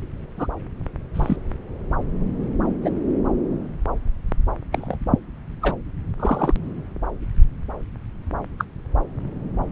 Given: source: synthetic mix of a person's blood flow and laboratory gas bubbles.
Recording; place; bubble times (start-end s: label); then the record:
Doppler ultrasound of blood flow; subclavian vein
0.38-0.47 s: bubbles
1.14-1.37 s: bubbles
2.82-2.90 s: bubbles
4.72-4.97 s: bubbles
5.62-5.77 s: bubbles
6.19-6.54 s: bubbles
8.58-8.64 s: bubbles
From the record:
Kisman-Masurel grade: 122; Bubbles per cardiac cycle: 1 to 2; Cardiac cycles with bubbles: 10 to 50%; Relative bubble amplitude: moderate (0.250 to 0.450); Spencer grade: 2 (many but less than half of the cardiac periods contain bubble signals, singularly or in groups); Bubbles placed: anywhere in the cardiac cycle